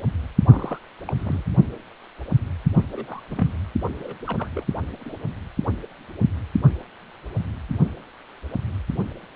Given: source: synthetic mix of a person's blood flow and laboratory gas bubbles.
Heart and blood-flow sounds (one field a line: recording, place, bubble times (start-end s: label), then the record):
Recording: Doppler ultrasound of blood flow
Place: precordium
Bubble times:
0.45-0.78 s: bubbles
1.08-1.13 s: bubbles
1.16-1.43 s: bubbles
2.74-2.83 s: bubbles
2.92-3.20 s: bubbles
3.31-3.48 s: bubbles
4.02-4.21 s: bubbles
4.26-4.48 s: bubbles
4.54-4.66 s: bubbles
5.05-5.13 s: bubbles
From the record:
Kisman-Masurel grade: 221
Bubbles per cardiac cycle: several, 3 to 8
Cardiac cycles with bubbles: 10 to 50%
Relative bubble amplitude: barely perceptible (0.100 to 0.250)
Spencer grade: 2 (many but less than half of the cardiac periods contain bubble signals, singularly or in groups)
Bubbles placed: anywhere in the cardiac cycle